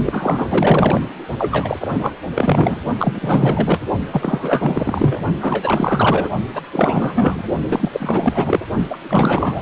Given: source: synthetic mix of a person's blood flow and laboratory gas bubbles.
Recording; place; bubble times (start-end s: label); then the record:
Doppler ultrasound of blood flow; precordium
0.05-1.08 s: bubbles
1.38-2.17 s: bubbles
2.34-2.77 s: bubbles
2.98-3.80 s: bubbles
4.12-5.25 s: bubbles
5.40-6.29 s: bubbles
6.54-6.62 s: bubbles
6.73-7.43 s: bubbles
7.69-8.60 s: bubbles
8.89-8.99 s: bubbles
9.04-9.62 s: bubbles
From the record:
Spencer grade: 4 (maximum detectable bubble signal sounding continuously throughout systole and diastole of every cardiac period, and overriding the amplitude of the normal cardiac signals); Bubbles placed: only in the low amplitude regions of the cardiac cycle